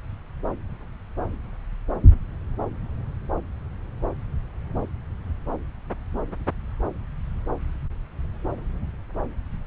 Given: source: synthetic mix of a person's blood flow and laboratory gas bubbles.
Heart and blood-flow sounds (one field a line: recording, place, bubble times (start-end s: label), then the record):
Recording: Doppler ultrasound of blood flow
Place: subclavian vein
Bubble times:
no bubbles
From the record:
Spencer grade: 0 (complete lack of bubble signals)